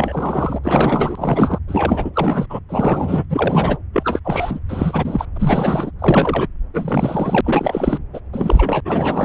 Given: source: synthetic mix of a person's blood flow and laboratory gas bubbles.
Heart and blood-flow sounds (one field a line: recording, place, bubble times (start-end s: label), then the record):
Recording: Doppler ultrasound of blood flow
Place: subclavian vein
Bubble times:
0.00-0.59 s: bubbles
0.64-1.58 s: bubbles
1.68-2.10 s: bubbles
2.13-2.46 s: bubbles
2.49-2.59 s: bubbles
2.69-3.25 s: bubbles
3.29-3.78 s: bubbles
3.93-4.20 s: bubbles
4.25-4.59 s: bubbles
4.68-5.25 s: bubbles
5.35-5.91 s: bubbles
5.99-6.47 s: bubbles
6.74-7.41 s: bubbles
7.43-8.00 s: bubbles
8.13-8.21 s: bubbles
8.33-8.81 s: bubbles
8.85-9.25 s: bubbles
From the record:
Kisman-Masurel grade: 343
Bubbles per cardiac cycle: rolling drumbeat, 9 or more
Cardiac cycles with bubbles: 100%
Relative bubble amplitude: loud (0.450 to 0.775)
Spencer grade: 3 (all of the cardiac periods contain showers or single bubble signals, but not dominating or overriding the cardiac motion signals)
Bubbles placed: anywhere in the cardiac cycle